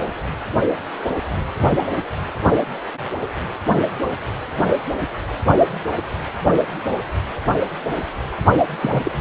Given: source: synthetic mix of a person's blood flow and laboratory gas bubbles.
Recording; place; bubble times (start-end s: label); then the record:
Doppler ultrasound of blood flow; precordium
8.82-9.11 s: bubbles
From the record:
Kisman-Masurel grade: 212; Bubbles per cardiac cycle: several, 3 to 8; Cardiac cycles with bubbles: 1 to 10%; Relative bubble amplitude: moderate (0.250 to 0.450); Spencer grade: 1 (occasional bubble signal discernible with the cardiac motion signal, with majority of cardiac periods free of bubbles); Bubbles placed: anywhere in the cardiac cycle